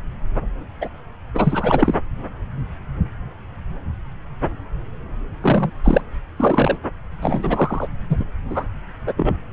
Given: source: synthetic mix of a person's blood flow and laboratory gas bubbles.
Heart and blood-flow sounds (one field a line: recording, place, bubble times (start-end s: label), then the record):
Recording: Doppler ultrasound of blood flow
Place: subclavian vein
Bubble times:
0.81-0.89 s: bubbles
1.34-1.94 s: bubbles
5.42-5.71 s: bubbles
5.83-6.01 s: bubbles
6.37-6.77 s: bubbles
7.21-7.87 s: bubbles
8.09-8.16 s: bubbles
8.19-8.24 s: bubbles
8.49-8.65 s: bubbles
9.06-9.13 s: bubbles
9.16-9.32 s: bubbles
From the record:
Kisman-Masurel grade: 223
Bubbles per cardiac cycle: several, 3 to 8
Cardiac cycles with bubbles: 10 to 50%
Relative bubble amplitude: loud (0.450 to 0.775)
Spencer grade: 2 (many but less than half of the cardiac periods contain bubble signals, singularly or in groups)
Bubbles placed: anywhere in the cardiac cycle